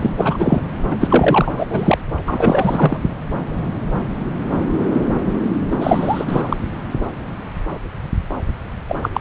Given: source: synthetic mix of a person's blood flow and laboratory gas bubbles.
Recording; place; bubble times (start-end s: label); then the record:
Doppler ultrasound of blood flow; subclavian vein
0.01-0.11 s: bubbles
0.18-0.60 s: bubbles
0.91-0.96 s: bubbles
1.01-1.53 s: bubbles
1.57-1.66 s: bubbles
1.70-1.98 s: bubbles
2.28-2.99 s: bubbles
5.71-5.76 s: bubbles
5.79-6.57 s: bubbles
8.89-8.95 s: bubbles
9.02-9.09 s: bubbles
9.13-9.21 s: bubbles
From the record:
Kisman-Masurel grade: 333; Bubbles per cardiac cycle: rolling drumbeat, 9 or more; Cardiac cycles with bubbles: 50 to 99%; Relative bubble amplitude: loud (0.450 to 0.775); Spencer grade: 3 (all of the cardiac periods contain showers or single bubble signals, but not dominating or overriding the cardiac motion signals); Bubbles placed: anywhere in the cardiac cycle